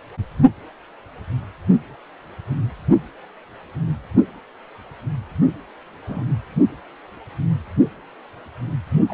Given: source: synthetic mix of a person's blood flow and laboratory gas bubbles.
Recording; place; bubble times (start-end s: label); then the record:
Doppler ultrasound of blood flow; precordium
6.07-6.25 s: bubbles
9.08-9.14 s: bubbles
From the record:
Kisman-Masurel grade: 121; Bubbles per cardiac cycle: 1 to 2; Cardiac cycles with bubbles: 10 to 50%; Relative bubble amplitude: barely perceptible (0.100 to 0.250); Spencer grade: 2 (many but less than half of the cardiac periods contain bubble signals, singularly or in groups); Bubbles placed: only in the low amplitude regions of the cardiac cycle